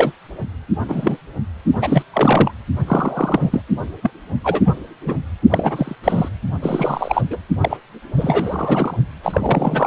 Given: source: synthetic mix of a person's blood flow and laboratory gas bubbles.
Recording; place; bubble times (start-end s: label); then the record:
Doppler ultrasound of blood flow; precordium
0.00-0.11 s: bubbles
0.89-1.17 s: bubbles
1.74-2.03 s: bubbles
2.12-2.52 s: bubbles
2.87-3.62 s: bubbles
4.02-4.10 s: bubbles
4.43-4.61 s: bubbles
4.64-4.75 s: bubbles
5.06-5.15 s: bubbles
5.50-5.96 s: bubbles
6.04-6.29 s: bubbles
6.61-7.22 s: bubbles
7.30-7.38 s: bubbles
7.60-7.77 s: bubbles
8.17-8.96 s: bubbles
9.23-9.87 s: bubbles
From the record:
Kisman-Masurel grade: 243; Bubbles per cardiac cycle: several, 3 to 8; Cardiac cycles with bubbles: 100%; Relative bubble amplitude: loud (0.450 to 0.775); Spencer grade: 3 (all of the cardiac periods contain showers or single bubble signals, but not dominating or overriding the cardiac motion signals); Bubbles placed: only in the low amplitude regions of the cardiac cycle